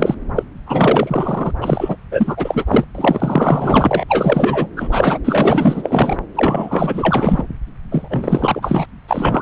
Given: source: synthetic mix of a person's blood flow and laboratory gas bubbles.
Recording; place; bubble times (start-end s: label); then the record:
Doppler ultrasound of blood flow; subclavian vein
0.00-0.15 s: bubbles
0.35-0.43 s: bubbles
0.67-1.54 s: bubbles
1.61-1.96 s: bubbles
2.11-2.84 s: bubbles
2.94-4.05 s: bubbles
4.08-4.67 s: bubbles
4.76-4.88 s: bubbles
4.91-5.18 s: bubbles
5.24-6.17 s: bubbles
6.35-7.43 s: bubbles
7.91-8.86 s: bubbles
9.08-9.42 s: bubbles
From the record:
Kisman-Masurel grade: 444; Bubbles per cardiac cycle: continuous sound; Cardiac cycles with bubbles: 100%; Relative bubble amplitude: maximal (0.775 to 0.999); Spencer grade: 4 (maximum detectable bubble signal sounding continuously throughout systole and diastole of every cardiac period, and overriding the amplitude of the normal cardiac signals); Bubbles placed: anywhere in the cardiac cycle